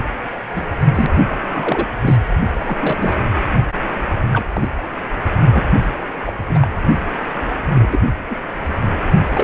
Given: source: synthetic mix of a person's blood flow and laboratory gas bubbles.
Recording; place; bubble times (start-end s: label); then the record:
Doppler ultrasound of blood flow; precordium
0.33-0.40 s: bubbles
0.56-0.65 s: bubbles
0.95-1.06 s: bubbles
1.49-1.88 s: bubbles
2.02-2.17 s: bubbles
2.55-2.77 s: bubbles
2.79-3.17 s: bubbles
4.33-4.46 s: bubbles
4.53-4.72 s: bubbles
4.77-4.84 s: bubbles
5.43-5.62 s: bubbles
6.26-6.33 s: bubbles
6.38-6.67 s: bubbles
7.74-8.03 s: bubbles
8.28-8.37 s: bubbles
8.90-8.93 s: bubbles
9.34-9.44 s: bubbles
From the record:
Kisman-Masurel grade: 242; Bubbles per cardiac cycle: several, 3 to 8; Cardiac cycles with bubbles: 100%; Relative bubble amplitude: moderate (0.250 to 0.450); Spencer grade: 3 (all of the cardiac periods contain showers or single bubble signals, but not dominating or overriding the cardiac motion signals); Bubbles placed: anywhere in the cardiac cycle